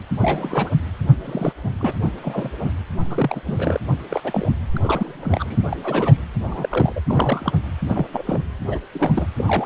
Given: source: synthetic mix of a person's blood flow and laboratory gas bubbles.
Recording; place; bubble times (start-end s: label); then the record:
Doppler ultrasound of blood flow; precordium
0.00-0.04 s: bubbles
0.19-0.70 s: bubbles
1.24-1.53 s: bubbles
1.63-1.72 s: bubbles
1.80-1.93 s: bubbles
2.23-2.54 s: bubbles
2.62-2.72 s: bubbles
3.00-3.81 s: bubbles
4.10-4.21 s: bubbles
4.24-4.50 s: bubbles
4.76-5.62 s: bubbles
5.70-5.77 s: bubbles
5.83-6.17 s: bubbles
6.47-6.93 s: bubbles
6.96-7.01 s: bubbles
7.07-7.53 s: bubbles
7.88-8.06 s: bubbles
8.12-8.43 s: bubbles
8.67-8.79 s: bubbles
8.92-9.27 s: bubbles
9.38-9.66 s: bubbles
From the record:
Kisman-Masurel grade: 242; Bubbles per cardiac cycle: several, 3 to 8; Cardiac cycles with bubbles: 100%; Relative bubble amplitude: moderate (0.250 to 0.450); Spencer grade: 3 (all of the cardiac periods contain showers or single bubble signals, but not dominating or overriding the cardiac motion signals); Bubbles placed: anywhere in the cardiac cycle